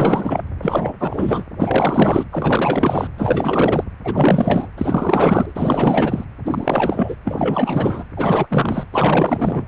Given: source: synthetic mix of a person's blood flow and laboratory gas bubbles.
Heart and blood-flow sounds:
Doppler ultrasound of blood flow; precordium
0.00-0.42 s: bubbles
0.61-0.94 s: bubbles
0.99-1.44 s: bubbles
1.59-2.26 s: bubbles
2.31-3.08 s: bubbles
3.18-3.84 s: bubbles
4.04-4.67 s: bubbles
4.77-5.52 s: bubbles
5.55-6.25 s: bubbles
6.44-7.15 s: bubbles
7.25-8.04 s: bubbles
8.16-8.47 s: bubbles
8.49-8.86 s: bubbles
8.91-9.65 s: bubbles
From the record:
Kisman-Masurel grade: 444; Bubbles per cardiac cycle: continuous sound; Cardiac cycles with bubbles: 100%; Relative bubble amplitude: maximal (0.775 to 0.999); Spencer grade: 4 (maximum detectable bubble signal sounding continuously throughout systole and diastole of every cardiac period, and overriding the amplitude of the normal cardiac signals); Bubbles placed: anywhere in the cardiac cycle

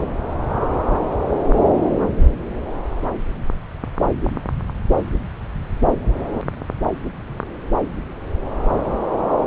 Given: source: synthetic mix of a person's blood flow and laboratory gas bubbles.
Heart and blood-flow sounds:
Doppler ultrasound of blood flow; subclavian vein
no bubbles
From the record:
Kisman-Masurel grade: 000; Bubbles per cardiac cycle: 0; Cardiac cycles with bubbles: 0%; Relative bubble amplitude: no bubbles discernible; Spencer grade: 0 (complete lack of bubble signals)

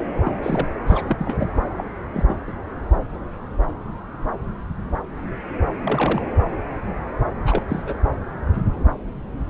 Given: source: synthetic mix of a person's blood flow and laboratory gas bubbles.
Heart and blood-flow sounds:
Doppler ultrasound of blood flow; subclavian vein
0.24-0.32 s: bubbles
0.42-0.67 s: bubbles
0.86-1.47 s: bubbles
1.77-1.84 s: bubbles
2.14-2.36 s: bubbles
2.47-2.53 s: bubbles
5.79-6.22 s: bubbles
7.45-7.63 s: bubbles
7.68-7.83 s: bubbles
7.87-7.95 s: bubbles
From the record:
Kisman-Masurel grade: 222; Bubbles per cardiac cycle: several, 3 to 8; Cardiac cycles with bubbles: 10 to 50%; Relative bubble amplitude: moderate (0.250 to 0.450); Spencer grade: 2 (many but less than half of the cardiac periods contain bubble signals, singularly or in groups); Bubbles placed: anywhere in the cardiac cycle

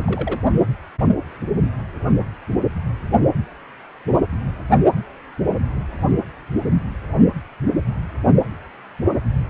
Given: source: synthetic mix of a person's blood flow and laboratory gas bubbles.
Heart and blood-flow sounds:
Doppler ultrasound of blood flow; precordium
0.00-0.40 s: bubbles
From the record:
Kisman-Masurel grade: 121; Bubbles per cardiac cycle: 1 to 2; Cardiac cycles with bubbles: 10 to 50%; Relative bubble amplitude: barely perceptible (0.100 to 0.250); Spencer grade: 2 (many but less than half of the cardiac periods contain bubble signals, singularly or in groups); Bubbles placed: only in the low amplitude regions of the cardiac cycle

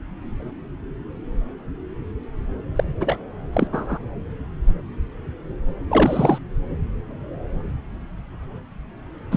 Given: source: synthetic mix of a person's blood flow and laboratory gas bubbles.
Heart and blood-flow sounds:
Doppler ultrasound of blood flow; subclavian vein
2.75-2.84 s: bubbles
3.00-3.24 s: bubbles
3.53-3.67 s: bubbles
3.73-3.98 s: bubbles
5.89-6.38 s: bubbles
9.31-9.37 s: bubbles
From the record:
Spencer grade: 2 (many but less than half of the cardiac periods contain bubble signals, singularly or in groups); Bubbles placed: anywhere in the cardiac cycle

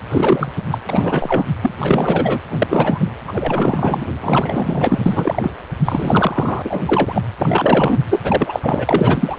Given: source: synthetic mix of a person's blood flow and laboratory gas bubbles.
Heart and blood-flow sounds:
Doppler ultrasound of blood flow; precordium
0.09-0.52 s: bubbles
0.70-0.78 s: bubbles
0.89-1.44 s: bubbles
1.62-1.71 s: bubbles
1.78-2.39 s: bubbles
2.50-3.10 s: bubbles
3.28-4.06 s: bubbles
4.21-5.52 s: bubbles
5.84-6.81 s: bubbles
6.86-7.22 s: bubbles
7.38-7.99 s: bubbles
8.10-8.60 s: bubbles
8.62-9.39 s: bubbles
From the record:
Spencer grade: 3 (all of the cardiac periods contain showers or single bubble signals, but not dominating or overriding the cardiac motion signals); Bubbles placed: anywhere in the cardiac cycle

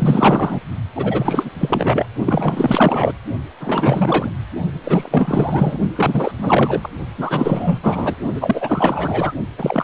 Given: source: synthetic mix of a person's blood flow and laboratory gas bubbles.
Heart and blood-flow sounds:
Doppler ultrasound of blood flow; precordium
0.00-0.60 s: bubbles
0.95-1.50 s: bubbles
1.58-2.06 s: bubbles
2.25-3.12 s: bubbles
3.60-4.30 s: bubbles
4.83-5.79 s: bubbles
5.96-6.31 s: bubbles
6.37-6.89 s: bubbles
7.17-7.79 s: bubbles
7.83-8.16 s: bubbles
8.35-9.33 s: bubbles
9.58-9.84 s: bubbles
From the record:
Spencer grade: 4 (maximum detectable bubble signal sounding continuously throughout systole and diastole of every cardiac period, and overriding the amplitude of the normal cardiac signals); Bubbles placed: only in the low amplitude regions of the cardiac cycle

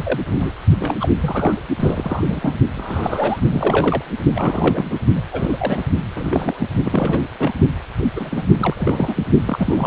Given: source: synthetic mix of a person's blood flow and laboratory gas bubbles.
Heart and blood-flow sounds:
Doppler ultrasound of blood flow; precordium
0.00-0.20 s: bubbles
0.26-0.54 s: bubbles
0.79-0.95 s: bubbles
0.99-1.08 s: bubbles
1.21-1.62 s: bubbles
1.79-2.56 s: bubbles
2.76-3.40 s: bubbles
3.50-4.02 s: bubbles
4.35-4.98 s: bubbles
5.14-5.22 s: bubbles
5.32-5.85 s: bubbles
6.15-6.69 s: bubbles
6.85-7.27 s: bubbles
7.38-7.54 s: bubbles
8.15-8.44 s: bubbles
8.59-8.74 s: bubbles
8.77-9.23 s: bubbles
9.46-9.87 s: bubbles
From the record:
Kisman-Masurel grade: 242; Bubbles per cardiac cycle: several, 3 to 8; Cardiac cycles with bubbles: 100%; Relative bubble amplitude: moderate (0.250 to 0.450); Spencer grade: 3 (all of the cardiac periods contain showers or single bubble signals, but not dominating or overriding the cardiac motion signals); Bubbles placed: only in the low amplitude regions of the cardiac cycle

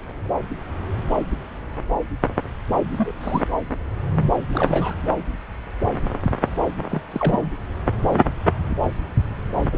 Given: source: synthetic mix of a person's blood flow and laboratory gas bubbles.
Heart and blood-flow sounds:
Doppler ultrasound of blood flow; subclavian vein
2.97-3.11 s: bubbles
3.21-3.42 s: bubbles
4.51-5.08 s: bubbles
6.89-7.01 s: bubbles
7.10-7.52 s: bubbles
9.71-9.78 s: bubbles
From the record:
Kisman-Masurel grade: 221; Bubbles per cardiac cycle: several, 3 to 8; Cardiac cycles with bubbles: 10 to 50%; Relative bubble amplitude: barely perceptible (0.100 to 0.250); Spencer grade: 2 (many but less than half of the cardiac periods contain bubble signals, singularly or in groups); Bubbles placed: anywhere in the cardiac cycle

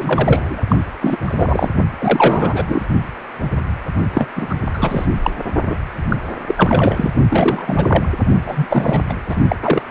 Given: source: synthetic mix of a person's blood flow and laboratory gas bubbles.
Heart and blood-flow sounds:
Doppler ultrasound of blood flow; precordium
0.00-0.61 s: bubbles
0.68-0.84 s: bubbles
1.01-1.17 s: bubbles
1.24-1.70 s: bubbles
1.98-2.86 s: bubbles
4.13-4.26 s: bubbles
4.35-4.55 s: bubbles
4.74-5.06 s: bubbles
5.22-5.30 s: bubbles
5.69-5.76 s: bubbles
6.09-6.17 s: bubbles
6.47-7.10 s: bubbles
7.30-8.08 s: bubbles
8.45-8.67 s: bubbles
8.70-9.02 s: bubbles
9.09-9.15 s: bubbles
9.29-9.36 s: bubbles
9.48-9.56 s: bubbles
9.62-9.83 s: bubbles
From the record:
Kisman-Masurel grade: 333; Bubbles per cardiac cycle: rolling drumbeat, 9 or more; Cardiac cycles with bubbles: 50 to 99%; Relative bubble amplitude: loud (0.450 to 0.775); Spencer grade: 3 (all of the cardiac periods contain showers or single bubble signals, but not dominating or overriding the cardiac motion signals); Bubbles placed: only in the low amplitude regions of the cardiac cycle

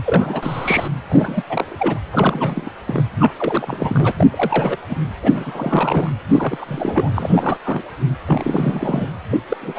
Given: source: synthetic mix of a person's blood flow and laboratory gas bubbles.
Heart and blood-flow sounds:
Doppler ultrasound of blood flow; precordium
0.04-0.88 s: bubbles
1.09-1.43 s: bubbles
1.46-2.00 s: bubbles
2.10-2.70 s: bubbles
2.87-3.02 s: bubbles
3.19-3.33 s: bubbles
3.37-4.12 s: bubbles
4.16-4.28 s: bubbles
4.31-4.77 s: bubbles
4.88-4.96 s: bubbles
5.23-6.11 s: bubbles
6.28-7.58 s: bubbles
7.64-7.83 s: bubbles
8.27-9.06 s: bubbles
9.30-9.38 s: bubbles
9.48-9.57 s: bubbles
9.61-9.79 s: bubbles
From the record:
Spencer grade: 3 (all of the cardiac periods contain showers or single bubble signals, but not dominating or overriding the cardiac motion signals); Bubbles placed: anywhere in the cardiac cycle

